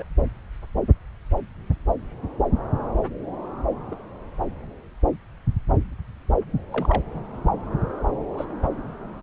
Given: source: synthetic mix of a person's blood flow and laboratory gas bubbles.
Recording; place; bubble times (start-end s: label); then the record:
Doppler ultrasound of blood flow; subclavian vein
0.00-0.04 s: bubbles
3.92-3.96 s: bubbles
6.72-7.02 s: bubbles
8.38-8.45 s: bubbles
8.63-8.68 s: bubbles
From the record:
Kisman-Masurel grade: 121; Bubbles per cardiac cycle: 1 to 2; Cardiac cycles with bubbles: 10 to 50%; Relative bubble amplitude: barely perceptible (0.100 to 0.250); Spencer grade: 2 (many but less than half of the cardiac periods contain bubble signals, singularly or in groups); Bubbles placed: anywhere in the cardiac cycle